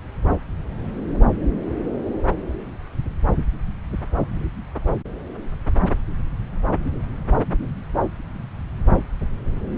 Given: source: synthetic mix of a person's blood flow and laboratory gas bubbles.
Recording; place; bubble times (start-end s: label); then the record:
Doppler ultrasound of blood flow; subclavian vein
no bubbles
From the record:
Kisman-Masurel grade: 000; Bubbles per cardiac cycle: 0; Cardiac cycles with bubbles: 0%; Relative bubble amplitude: no bubbles discernible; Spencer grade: 0 (complete lack of bubble signals)